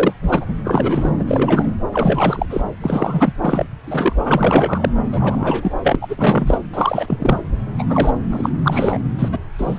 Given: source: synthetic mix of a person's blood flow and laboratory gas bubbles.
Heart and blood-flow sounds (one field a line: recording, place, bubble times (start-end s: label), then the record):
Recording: Doppler ultrasound of blood flow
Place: subclavian vein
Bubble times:
0.00-0.13 s: bubbles
0.22-0.54 s: bubbles
0.64-1.11 s: bubbles
1.19-1.24 s: bubbles
1.28-1.74 s: bubbles
1.92-2.46 s: bubbles
2.49-2.61 s: bubbles
2.80-3.33 s: bubbles
3.42-3.67 s: bubbles
3.84-4.16 s: bubbles
4.23-4.89 s: bubbles
5.12-5.73 s: bubbles
5.83-5.96 s: bubbles
6.01-6.58 s: bubbles
6.73-7.42 s: bubbles
7.79-7.86 s: bubbles
7.88-8.12 s: bubbles
8.30-8.49 s: bubbles
8.63-9.00 s: bubbles
9.19-9.29 s: bubbles
9.31-9.38 s: bubbles
9.58-9.79 s: bubbles
From the record:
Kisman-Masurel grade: 343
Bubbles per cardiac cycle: rolling drumbeat, 9 or more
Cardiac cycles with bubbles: 100%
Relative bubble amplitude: loud (0.450 to 0.775)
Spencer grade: 3 (all of the cardiac periods contain showers or single bubble signals, but not dominating or overriding the cardiac motion signals)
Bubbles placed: anywhere in the cardiac cycle